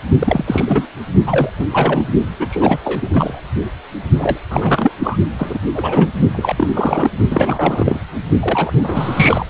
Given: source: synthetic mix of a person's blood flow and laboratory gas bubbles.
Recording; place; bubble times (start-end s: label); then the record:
Doppler ultrasound of blood flow; precordium
0.19-0.86 s: bubbles
1.26-1.49 s: bubbles
1.59-1.65 s: bubbles
1.72-2.10 s: bubbles
2.38-2.47 s: bubbles
2.50-2.78 s: bubbles
2.84-3.10 s: bubbles
3.12-3.40 s: bubbles
4.18-4.39 s: bubbles
4.50-4.91 s: bubbles
4.99-5.18 s: bubbles
5.38-5.59 s: bubbles
5.74-6.10 s: bubbles
6.32-6.54 s: bubbles
6.56-6.68 s: bubbles
6.73-7.11 s: bubbles
7.30-8.00 s: bubbles
8.41-8.72 s: bubbles
8.76-9.46 s: bubbles
From the record:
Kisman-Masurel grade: 343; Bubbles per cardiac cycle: rolling drumbeat, 9 or more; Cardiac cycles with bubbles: 100%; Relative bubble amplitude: loud (0.450 to 0.775); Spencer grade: 3 (all of the cardiac periods contain showers or single bubble signals, but not dominating or overriding the cardiac motion signals); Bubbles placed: only in the low amplitude regions of the cardiac cycle